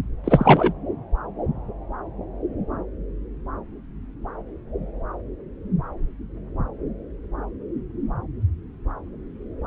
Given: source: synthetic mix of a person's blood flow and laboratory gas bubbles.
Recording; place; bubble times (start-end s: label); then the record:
Doppler ultrasound of blood flow; subclavian vein
0.24-0.73 s: bubbles
From the record:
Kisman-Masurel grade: 223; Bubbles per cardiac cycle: several, 3 to 8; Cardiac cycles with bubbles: 10 to 50%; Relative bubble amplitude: loud (0.450 to 0.775); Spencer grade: 2 (many but less than half of the cardiac periods contain bubble signals, singularly or in groups); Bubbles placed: anywhere in the cardiac cycle